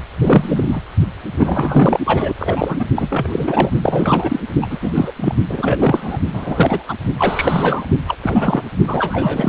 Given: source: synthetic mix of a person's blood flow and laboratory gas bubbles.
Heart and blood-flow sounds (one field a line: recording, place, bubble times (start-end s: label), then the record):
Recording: Doppler ultrasound of blood flow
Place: precordium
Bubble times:
0.22-0.80 s: bubbles
1.26-1.99 s: bubbles
2.05-2.33 s: bubbles
2.39-2.85 s: bubbles
2.95-3.70 s: bubbles
3.82-4.40 s: bubbles
4.62-4.67 s: bubbles
4.70-4.79 s: bubbles
4.82-4.92 s: bubbles
4.95-5.12 s: bubbles
5.16-5.35 s: bubbles
5.49-6.18 s: bubbles
6.33-6.83 s: bubbles
6.88-6.95 s: bubbles
7.18-7.86 s: bubbles
8.07-8.17 s: bubbles
8.23-8.64 s: bubbles
8.87-9.49 s: bubbles
From the record:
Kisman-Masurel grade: 343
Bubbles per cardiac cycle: rolling drumbeat, 9 or more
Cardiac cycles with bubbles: 100%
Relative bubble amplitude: loud (0.450 to 0.775)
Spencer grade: 3 (all of the cardiac periods contain showers or single bubble signals, but not dominating or overriding the cardiac motion signals)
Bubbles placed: only in the low amplitude regions of the cardiac cycle